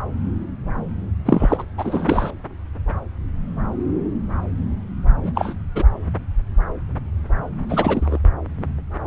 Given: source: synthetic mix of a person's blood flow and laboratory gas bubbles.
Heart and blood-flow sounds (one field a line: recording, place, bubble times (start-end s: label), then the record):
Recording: Doppler ultrasound of blood flow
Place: subclavian vein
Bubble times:
1.25-1.64 s: bubbles
1.77-2.31 s: bubbles
5.22-5.54 s: bubbles
5.75-5.84 s: bubbles
7.69-8.18 s: bubbles
From the record:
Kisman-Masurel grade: 222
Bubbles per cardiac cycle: several, 3 to 8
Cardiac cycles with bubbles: 10 to 50%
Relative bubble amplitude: moderate (0.250 to 0.450)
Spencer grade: 2 (many but less than half of the cardiac periods contain bubble signals, singularly or in groups)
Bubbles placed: anywhere in the cardiac cycle